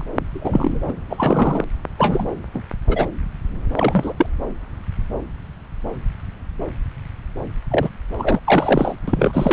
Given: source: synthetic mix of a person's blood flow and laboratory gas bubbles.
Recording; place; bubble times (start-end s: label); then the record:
Doppler ultrasound of blood flow; subclavian vein
0.00-0.04 s: bubbles
0.34-0.94 s: bubbles
1.09-1.65 s: bubbles
1.98-2.29 s: bubbles
2.54-2.61 s: bubbles
2.87-3.07 s: bubbles
3.75-4.13 s: bubbles
4.17-4.26 s: bubbles
7.70-7.90 s: bubbles
8.17-8.40 s: bubbles
8.47-8.94 s: bubbles
9.07-9.53 s: bubbles
From the record:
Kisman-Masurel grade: 232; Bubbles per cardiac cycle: several, 3 to 8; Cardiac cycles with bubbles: 50 to 99%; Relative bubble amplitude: moderate (0.250 to 0.450); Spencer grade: 3 (all of the cardiac periods contain showers or single bubble signals, but not dominating or overriding the cardiac motion signals); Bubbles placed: anywhere in the cardiac cycle